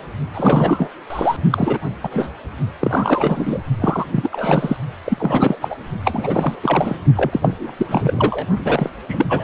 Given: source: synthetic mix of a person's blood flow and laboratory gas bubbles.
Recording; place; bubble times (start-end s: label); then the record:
Doppler ultrasound of blood flow; precordium
0.34-0.89 s: bubbles
1.10-1.36 s: bubbles
1.51-1.78 s: bubbles
2.03-2.30 s: bubbles
2.80-3.60 s: bubbles
3.79-4.06 s: bubbles
4.11-4.29 s: bubbles
4.32-4.77 s: bubbles
5.04-5.58 s: bubbles
5.61-5.76 s: bubbles
6.04-6.55 s: bubbles
6.62-6.96 s: bubbles
7.16-7.72 s: bubbles
7.77-8.46 s: bubbles
8.64-8.90 s: bubbles
9.08-9.26 s: bubbles
9.29-9.44 s: bubbles
From the record:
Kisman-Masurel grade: 343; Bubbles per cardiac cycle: rolling drumbeat, 9 or more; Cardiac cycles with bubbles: 100%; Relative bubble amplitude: loud (0.450 to 0.775); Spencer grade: 3 (all of the cardiac periods contain showers or single bubble signals, but not dominating or overriding the cardiac motion signals); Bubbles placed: only in the low amplitude regions of the cardiac cycle